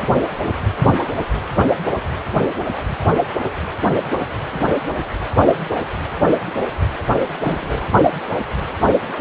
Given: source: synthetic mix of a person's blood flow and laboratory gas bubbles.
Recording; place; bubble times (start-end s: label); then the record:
Doppler ultrasound of blood flow; precordium
4.52-4.60 s: bubbles
7.42-7.87 s: bubbles
From the record:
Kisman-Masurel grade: 121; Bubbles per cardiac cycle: 1 to 2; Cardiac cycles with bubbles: 10 to 50%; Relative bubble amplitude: barely perceptible (0.100 to 0.250); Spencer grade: 2 (many but less than half of the cardiac periods contain bubble signals, singularly or in groups); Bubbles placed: anywhere in the cardiac cycle